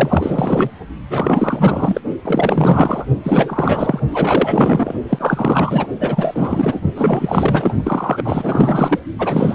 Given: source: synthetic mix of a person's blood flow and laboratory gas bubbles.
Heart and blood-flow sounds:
Doppler ultrasound of blood flow; precordium
0.00-0.70 s: bubbles
1.09-2.01 s: bubbles
2.25-3.05 s: bubbles
3.23-4.00 s: bubbles
4.10-4.93 s: bubbles
5.09-5.87 s: bubbles
6.00-6.81 s: bubbles
6.96-7.74 s: bubbles
7.83-8.99 s: bubbles
9.19-9.55 s: bubbles
From the record:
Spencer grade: 4 (maximum detectable bubble signal sounding continuously throughout systole and diastole of every cardiac period, and overriding the amplitude of the normal cardiac signals); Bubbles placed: only in the low amplitude regions of the cardiac cycle

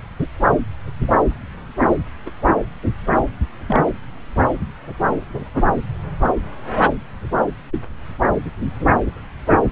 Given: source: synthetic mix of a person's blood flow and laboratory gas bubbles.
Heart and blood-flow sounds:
Doppler ultrasound of blood flow; subclavian vein
2.25-2.30 s: bubbles
3.67-3.80 s: bubbles
From the record:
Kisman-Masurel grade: 121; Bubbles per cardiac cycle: 1 to 2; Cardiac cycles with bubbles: 10 to 50%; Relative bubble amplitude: barely perceptible (0.100 to 0.250); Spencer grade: 2 (many but less than half of the cardiac periods contain bubble signals, singularly or in groups); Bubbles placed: anywhere in the cardiac cycle

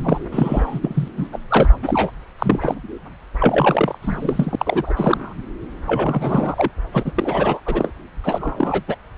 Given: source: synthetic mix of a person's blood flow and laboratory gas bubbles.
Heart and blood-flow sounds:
Doppler ultrasound of blood flow; subclavian vein
0.00-0.18 s: bubbles
0.32-0.80 s: bubbles
0.83-1.08 s: bubbles
1.16-1.28 s: bubbles
1.32-1.39 s: bubbles
1.50-1.74 s: bubbles
1.83-2.11 s: bubbles
2.39-2.75 s: bubbles
3.40-3.98 s: bubbles
4.01-4.55 s: bubbles
4.59-4.93 s: bubbles
4.97-5.33 s: bubbles
5.86-6.69 s: bubbles
6.92-7.12 s: bubbles
7.15-7.60 s: bubbles
7.66-7.92 s: bubbles
8.24-8.83 s: bubbles
8.88-8.96 s: bubbles
From the record:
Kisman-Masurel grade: 342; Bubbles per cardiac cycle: rolling drumbeat, 9 or more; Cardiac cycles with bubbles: 100%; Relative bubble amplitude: moderate (0.250 to 0.450); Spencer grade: 3 (all of the cardiac periods contain showers or single bubble signals, but not dominating or overriding the cardiac motion signals); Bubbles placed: anywhere in the cardiac cycle

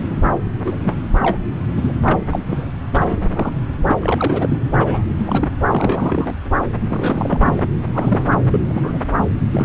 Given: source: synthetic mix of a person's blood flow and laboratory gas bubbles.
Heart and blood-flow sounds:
Doppler ultrasound of blood flow; subclavian vein
0.10-0.14 s: bubbles
0.65-0.94 s: bubbles
1.22-1.38 s: bubbles
1.77-1.93 s: bubbles
2.05-2.20 s: bubbles
2.29-2.39 s: bubbles
2.47-2.67 s: bubbles
2.93-3.52 s: bubbles
3.86-3.96 s: bubbles
4.00-4.57 s: bubbles
4.78-5.03 s: bubbles
5.08-5.15 s: bubbles
5.17-5.46 s: bubbles
5.72-6.33 s: bubbles
6.89-7.62 s: bubbles
7.75-8.30 s: bubbles
8.52-8.59 s: bubbles
8.66-9.14 s: bubbles
9.52-9.64 s: bubbles
From the record:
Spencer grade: 3 (all of the cardiac periods contain showers or single bubble signals, but not dominating or overriding the cardiac motion signals); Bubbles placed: anywhere in the cardiac cycle

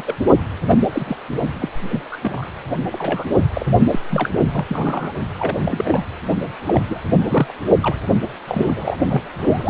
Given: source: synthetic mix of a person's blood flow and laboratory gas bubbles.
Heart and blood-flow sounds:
Doppler ultrasound of blood flow; precordium
0.00-0.16 s: bubbles
0.68-0.76 s: bubbles
0.92-1.16 s: bubbles
1.60-1.68 s: bubbles
1.89-2.02 s: bubbles
2.11-2.17 s: bubbles
2.22-2.46 s: bubbles
2.92-3.24 s: bubbles
3.54-3.66 s: bubbles
3.90-3.99 s: bubbles
4.10-4.30 s: bubbles
4.53-4.65 s: bubbles
4.68-5.14 s: bubbles
5.36-6.03 s: bubbles
6.66-6.81 s: bubbles
6.88-7.02 s: bubbles
7.16-7.55 s: bubbles
7.82-7.96 s: bubbles
8.47-8.97 s: bubbles
9.09-9.22 s: bubbles
9.38-9.69 s: bubbles
From the record:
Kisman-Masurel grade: 242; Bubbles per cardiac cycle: several, 3 to 8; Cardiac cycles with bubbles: 100%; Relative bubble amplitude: moderate (0.250 to 0.450); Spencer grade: 3 (all of the cardiac periods contain showers or single bubble signals, but not dominating or overriding the cardiac motion signals); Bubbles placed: only in the low amplitude regions of the cardiac cycle

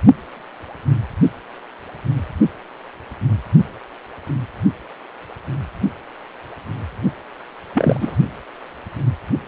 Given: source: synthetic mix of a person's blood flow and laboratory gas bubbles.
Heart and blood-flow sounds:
Doppler ultrasound of blood flow; precordium
7.74-8.17 s: bubbles
From the record:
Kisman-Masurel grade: 223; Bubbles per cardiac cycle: several, 3 to 8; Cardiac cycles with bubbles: 10 to 50%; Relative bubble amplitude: loud (0.450 to 0.775); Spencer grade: 2 (many but less than half of the cardiac periods contain bubble signals, singularly or in groups); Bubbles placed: only in the low amplitude regions of the cardiac cycle

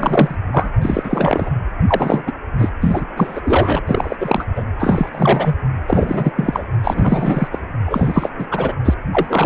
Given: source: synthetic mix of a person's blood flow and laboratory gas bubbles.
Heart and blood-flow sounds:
Doppler ultrasound of blood flow; precordium
0.00-0.35 s: bubbles
0.53-0.70 s: bubbles
0.82-1.50 s: bubbles
1.88-2.23 s: bubbles
2.27-2.33 s: bubbles
2.58-2.72 s: bubbles
2.81-3.05 s: bubbles
3.17-3.41 s: bubbles
3.44-3.79 s: bubbles
3.87-4.17 s: bubbles
4.20-4.45 s: bubbles
4.55-4.64 s: bubbles
4.79-5.55 s: bubbles
5.88-6.66 s: bubbles
6.83-7.49 s: bubbles
7.51-7.58 s: bubbles
7.85-8.30 s: bubbles
8.38-8.46 s: bubbles
8.50-8.75 s: bubbles
8.85-8.94 s: bubbles
9.12-9.46 s: bubbles
From the record:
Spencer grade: 3 (all of the cardiac periods contain showers or single bubble signals, but not dominating or overriding the cardiac motion signals); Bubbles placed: anywhere in the cardiac cycle

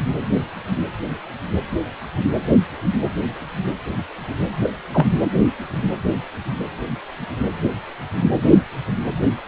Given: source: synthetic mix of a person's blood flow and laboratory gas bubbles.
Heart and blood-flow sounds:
Doppler ultrasound of blood flow; precordium
4.63-4.69 s: bubbles
4.92-5.06 s: bubbles
From the record:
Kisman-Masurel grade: 113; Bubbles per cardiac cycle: 1 to 2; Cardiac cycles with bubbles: 1 to 10%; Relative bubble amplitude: loud (0.450 to 0.775); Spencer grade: 1 (occasional bubble signal discernible with the cardiac motion signal, with majority of cardiac periods free of bubbles); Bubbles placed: anywhere in the cardiac cycle

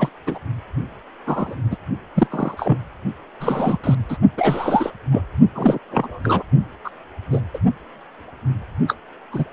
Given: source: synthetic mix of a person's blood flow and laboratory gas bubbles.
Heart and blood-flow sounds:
Doppler ultrasound of blood flow; precordium
0.00-0.09 s: bubbles
0.27-0.39 s: bubbles
1.25-1.54 s: bubbles
1.71-1.77 s: bubbles
2.15-2.27 s: bubbles
2.30-2.78 s: bubbles
3.40-3.78 s: bubbles
3.83-3.95 s: bubbles
4.08-4.17 s: bubbles
4.38-4.92 s: bubbles
5.11-5.22 s: bubbles
5.54-5.79 s: bubbles
5.91-6.20 s: bubbles
6.24-6.43 s: bubbles
6.84-6.90 s: bubbles
7.32-7.41 s: bubbles
7.54-7.58 s: bubbles
8.88-8.95 s: bubbles
9.31-9.44 s: bubbles
From the record:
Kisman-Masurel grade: 243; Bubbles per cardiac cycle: several, 3 to 8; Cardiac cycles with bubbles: 100%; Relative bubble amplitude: loud (0.450 to 0.775); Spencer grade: 3 (all of the cardiac periods contain showers or single bubble signals, but not dominating or overriding the cardiac motion signals); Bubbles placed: only in the low amplitude regions of the cardiac cycle

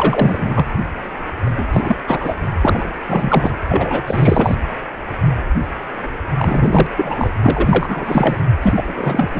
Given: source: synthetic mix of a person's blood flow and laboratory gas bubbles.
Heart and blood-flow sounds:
Doppler ultrasound of blood flow; precordium
0.00-0.66 s: bubbles
1.43-1.67 s: bubbles
1.73-1.97 s: bubbles
2.04-2.35 s: bubbles
2.61-2.87 s: bubbles
3.07-3.52 s: bubbles
3.69-4.04 s: bubbles
4.07-4.55 s: bubbles
6.36-6.88 s: bubbles
6.96-7.31 s: bubbles
7.43-8.40 s: bubbles
8.62-9.28 s: bubbles
9.33-9.40 s: bubbles
From the record:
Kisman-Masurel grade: 333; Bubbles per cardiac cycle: rolling drumbeat, 9 or more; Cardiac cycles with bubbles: 50 to 99%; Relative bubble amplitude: loud (0.450 to 0.775); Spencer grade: 3 (all of the cardiac periods contain showers or single bubble signals, but not dominating or overriding the cardiac motion signals); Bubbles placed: anywhere in the cardiac cycle

